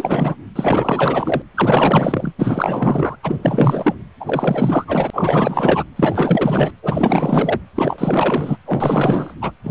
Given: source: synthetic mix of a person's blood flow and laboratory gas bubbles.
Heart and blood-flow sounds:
Doppler ultrasound of blood flow; precordium
0.00-0.35 s: bubbles
0.56-1.42 s: bubbles
1.54-2.32 s: bubbles
2.38-3.16 s: bubbles
3.23-3.36 s: bubbles
3.42-3.95 s: bubbles
4.20-4.85 s: bubbles
4.87-5.83 s: bubbles
5.96-6.71 s: bubbles
6.83-7.61 s: bubbles
7.75-8.57 s: bubbles
8.64-9.34 s: bubbles
9.41-9.51 s: bubbles
9.63-9.71 s: bubbles
From the record:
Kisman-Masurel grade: 444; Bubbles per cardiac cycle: continuous sound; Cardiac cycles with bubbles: 100%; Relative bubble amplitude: maximal (0.775 to 0.999); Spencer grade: 4 (maximum detectable bubble signal sounding continuously throughout systole and diastole of every cardiac period, and overriding the amplitude of the normal cardiac signals); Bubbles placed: anywhere in the cardiac cycle

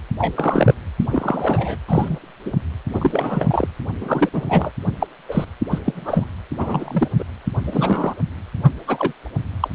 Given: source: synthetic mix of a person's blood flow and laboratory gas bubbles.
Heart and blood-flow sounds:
Doppler ultrasound of blood flow; precordium
0.18-0.74 s: bubbles
0.99-1.06 s: bubbles
1.10-1.77 s: bubbles
1.88-2.19 s: bubbles
2.45-2.52 s: bubbles
2.94-3.67 s: bubbles
4.00-4.29 s: bubbles
4.33-4.71 s: bubbles
5.00-5.07 s: bubbles
5.28-5.45 s: bubbles
5.71-5.79 s: bubbles
5.86-6.28 s: bubbles
6.58-7.08 s: bubbles
7.18-7.24 s: bubbles
7.63-8.14 s: bubbles
8.63-8.71 s: bubbles
8.88-9.12 s: bubbles
9.60-9.68 s: bubbles
From the record:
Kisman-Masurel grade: 233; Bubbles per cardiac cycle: several, 3 to 8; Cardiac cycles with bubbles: 50 to 99%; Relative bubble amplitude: loud (0.450 to 0.775); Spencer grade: 3 (all of the cardiac periods contain showers or single bubble signals, but not dominating or overriding the cardiac motion signals); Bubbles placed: anywhere in the cardiac cycle

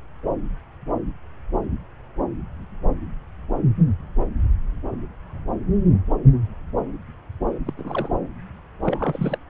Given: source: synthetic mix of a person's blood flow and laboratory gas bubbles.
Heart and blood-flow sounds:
Doppler ultrasound of blood flow; subclavian vein
7.67-7.74 s: bubbles
7.77-8.08 s: bubbles
8.81-9.38 s: bubbles
From the record:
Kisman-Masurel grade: 222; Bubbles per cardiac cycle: several, 3 to 8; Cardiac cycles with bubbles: 10 to 50%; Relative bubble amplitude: moderate (0.250 to 0.450); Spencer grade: 2 (many but less than half of the cardiac periods contain bubble signals, singularly or in groups); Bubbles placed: anywhere in the cardiac cycle

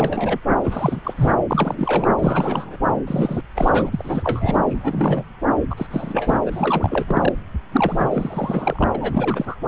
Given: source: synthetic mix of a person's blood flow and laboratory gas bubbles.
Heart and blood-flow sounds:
Doppler ultrasound of blood flow; subclavian vein
0.00-0.38 s: bubbles
0.64-1.00 s: bubbles
1.04-1.35 s: bubbles
1.50-2.09 s: bubbles
2.19-2.77 s: bubbles
3.07-3.41 s: bubbles
3.56-4.60 s: bubbles
4.70-5.23 s: bubbles
5.69-5.86 s: bubbles
5.90-6.38 s: bubbles
6.46-7.32 s: bubbles
7.72-8.88 s: bubbles
8.95-9.57 s: bubbles
From the record:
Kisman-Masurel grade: 332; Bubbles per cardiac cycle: rolling drumbeat, 9 or more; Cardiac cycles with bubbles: 50 to 99%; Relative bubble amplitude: moderate (0.250 to 0.450); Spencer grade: 3 (all of the cardiac periods contain showers or single bubble signals, but not dominating or overriding the cardiac motion signals); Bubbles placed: anywhere in the cardiac cycle

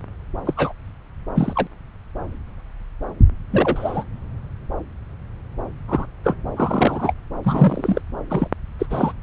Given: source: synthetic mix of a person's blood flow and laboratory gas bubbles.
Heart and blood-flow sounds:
Doppler ultrasound of blood flow; subclavian vein
0.45-0.54 s: bubbles
0.56-0.73 s: bubbles
1.35-1.67 s: bubbles
3.51-4.04 s: bubbles
5.88-6.06 s: bubbles
6.24-6.37 s: bubbles
6.56-7.13 s: bubbles
7.43-8.02 s: bubbles
8.30-8.48 s: bubbles
8.79-8.86 s: bubbles
8.90-9.12 s: bubbles
From the record:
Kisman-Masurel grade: 232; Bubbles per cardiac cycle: several, 3 to 8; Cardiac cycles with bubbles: 50 to 99%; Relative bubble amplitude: moderate (0.250 to 0.450); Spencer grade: 3 (all of the cardiac periods contain showers or single bubble signals, but not dominating or overriding the cardiac motion signals); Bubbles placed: anywhere in the cardiac cycle

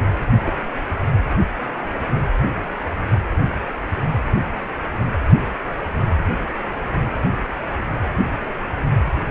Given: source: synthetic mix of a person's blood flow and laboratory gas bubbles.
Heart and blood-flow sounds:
Doppler ultrasound of blood flow; precordium
0.46-0.53 s: bubbles
From the record:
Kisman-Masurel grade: 111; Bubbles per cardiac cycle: 1 to 2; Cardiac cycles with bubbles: 1 to 10%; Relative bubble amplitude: barely perceptible (0.100 to 0.250); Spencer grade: 1 (occasional bubble signal discernible with the cardiac motion signal, with majority of cardiac periods free of bubbles); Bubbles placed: only in the low amplitude regions of the cardiac cycle

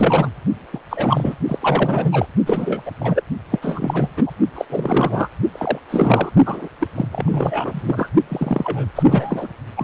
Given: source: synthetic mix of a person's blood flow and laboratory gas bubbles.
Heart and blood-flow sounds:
Doppler ultrasound of blood flow; precordium
0.00-0.29 s: bubbles
0.73-0.80 s: bubbles
0.90-1.34 s: bubbles
1.48-2.27 s: bubbles
2.46-2.82 s: bubbles
2.86-2.92 s: bubbles
3.00-3.22 s: bubbles
3.51-3.59 s: bubbles
3.62-4.11 s: bubbles
4.17-4.31 s: bubbles
4.55-4.65 s: bubbles
4.70-5.28 s: bubbles
5.52-5.79 s: bubbles
5.90-6.31 s: bubbles
6.46-6.68 s: bubbles
6.79-6.88 s: bubbles
6.95-7.08 s: bubbles
7.12-8.10 s: bubbles
8.29-8.87 s: bubbles
8.96-9.48 s: bubbles
9.76-9.84 s: bubbles
From the record:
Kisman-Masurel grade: 343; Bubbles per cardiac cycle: rolling drumbeat, 9 or more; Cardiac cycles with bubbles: 100%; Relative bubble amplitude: loud (0.450 to 0.775); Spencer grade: 3 (all of the cardiac periods contain showers or single bubble signals, but not dominating or overriding the cardiac motion signals); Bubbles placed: only in the low amplitude regions of the cardiac cycle

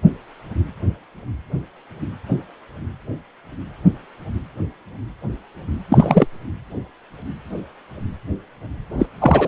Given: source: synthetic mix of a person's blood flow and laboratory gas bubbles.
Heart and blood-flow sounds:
Doppler ultrasound of blood flow; precordium
5.90-6.26 s: bubbles
8.99-9.07 s: bubbles
9.20-9.48 s: bubbles
From the record:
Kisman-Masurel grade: 223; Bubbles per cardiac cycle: several, 3 to 8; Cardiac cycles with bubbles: 10 to 50%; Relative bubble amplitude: loud (0.450 to 0.775); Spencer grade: 2 (many but less than half of the cardiac periods contain bubble signals, singularly or in groups); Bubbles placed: anywhere in the cardiac cycle

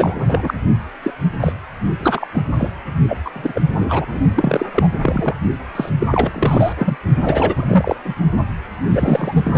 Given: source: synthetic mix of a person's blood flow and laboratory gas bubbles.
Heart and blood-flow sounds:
Doppler ultrasound of blood flow; precordium
0.00-0.54 s: bubbles
1.02-1.11 s: bubbles
1.40-1.52 s: bubbles
2.00-2.27 s: bubbles
2.34-2.42 s: bubbles
2.58-2.70 s: bubbles
3.08-3.17 s: bubbles
3.25-3.31 s: bubbles
3.34-3.61 s: bubbles
3.77-4.07 s: bubbles
4.12-4.20 s: bubbles
4.35-4.66 s: bubbles
4.74-4.88 s: bubbles
5.02-5.35 s: bubbles
5.75-5.89 s: bubbles
6.00-6.07 s: bubbles
6.12-6.73 s: bubbles
6.78-6.97 s: bubbles
7.22-7.98 s: bubbles
8.05-8.14 s: bubbles
8.87-9.58 s: bubbles
From the record:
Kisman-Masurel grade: 343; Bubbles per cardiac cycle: rolling drumbeat, 9 or more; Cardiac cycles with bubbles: 100%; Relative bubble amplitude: loud (0.450 to 0.775); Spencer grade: 3 (all of the cardiac periods contain showers or single bubble signals, but not dominating or overriding the cardiac motion signals); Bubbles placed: only in the low amplitude regions of the cardiac cycle

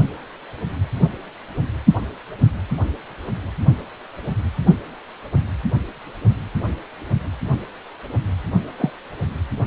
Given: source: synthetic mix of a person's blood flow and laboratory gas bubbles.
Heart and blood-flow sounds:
Doppler ultrasound of blood flow; precordium
8.78-8.90 s: bubbles
From the record:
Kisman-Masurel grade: 112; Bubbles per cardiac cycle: 1 to 2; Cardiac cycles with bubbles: 1 to 10%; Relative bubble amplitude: moderate (0.250 to 0.450); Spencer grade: 1 (occasional bubble signal discernible with the cardiac motion signal, with majority of cardiac periods free of bubbles); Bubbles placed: anywhere in the cardiac cycle

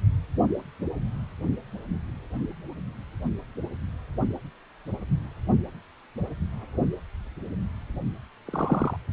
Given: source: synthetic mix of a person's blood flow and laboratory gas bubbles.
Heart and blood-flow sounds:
Doppler ultrasound of blood flow; precordium
8.47-8.96 s: bubbles
From the record:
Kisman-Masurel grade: 111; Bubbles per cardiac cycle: 1 to 2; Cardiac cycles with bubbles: 1 to 10%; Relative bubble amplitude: barely perceptible (0.100 to 0.250); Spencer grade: 1 (occasional bubble signal discernible with the cardiac motion signal, with majority of cardiac periods free of bubbles); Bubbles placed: only in the low amplitude regions of the cardiac cycle

